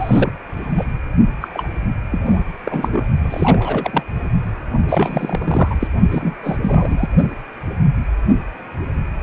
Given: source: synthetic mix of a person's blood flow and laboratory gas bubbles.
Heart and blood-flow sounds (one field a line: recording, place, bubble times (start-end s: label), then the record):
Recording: Doppler ultrasound of blood flow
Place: precordium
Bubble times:
0.00-0.33 s: bubbles
0.77-0.84 s: bubbles
1.42-1.48 s: bubbles
1.53-1.68 s: bubbles
2.12-2.21 s: bubbles
2.25-2.44 s: bubbles
2.65-3.06 s: bubbles
3.21-4.03 s: bubbles
4.89-5.75 s: bubbles
5.80-5.88 s: bubbles
6.11-6.34 s: bubbles
6.43-6.56 s: bubbles
6.62-7.09 s: bubbles
From the record:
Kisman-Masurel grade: 332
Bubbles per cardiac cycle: rolling drumbeat, 9 or more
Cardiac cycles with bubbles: 50 to 99%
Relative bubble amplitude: moderate (0.250 to 0.450)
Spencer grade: 3 (all of the cardiac periods contain showers or single bubble signals, but not dominating or overriding the cardiac motion signals)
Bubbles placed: only in the low amplitude regions of the cardiac cycle